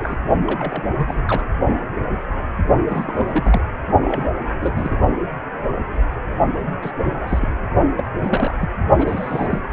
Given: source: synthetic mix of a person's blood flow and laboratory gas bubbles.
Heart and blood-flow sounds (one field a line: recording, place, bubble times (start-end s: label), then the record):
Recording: Doppler ultrasound of blood flow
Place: precordium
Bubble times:
0.00-0.15 s: bubbles
0.47-0.83 s: bubbles
0.96-1.23 s: bubbles
1.27-1.43 s: bubbles
2.87-3.64 s: bubbles
4.02-4.28 s: bubbles
4.61-4.97 s: bubbles
6.82-6.92 s: bubbles
6.98-7.47 s: bubbles
7.98-8.11 s: bubbles
8.21-8.52 s: bubbles
8.61-8.76 s: bubbles
8.97-9.60 s: bubbles
From the record:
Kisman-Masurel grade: 232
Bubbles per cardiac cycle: several, 3 to 8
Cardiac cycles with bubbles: 50 to 99%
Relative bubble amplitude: moderate (0.250 to 0.450)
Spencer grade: 3 (all of the cardiac periods contain showers or single bubble signals, but not dominating or overriding the cardiac motion signals)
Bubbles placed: only in the low amplitude regions of the cardiac cycle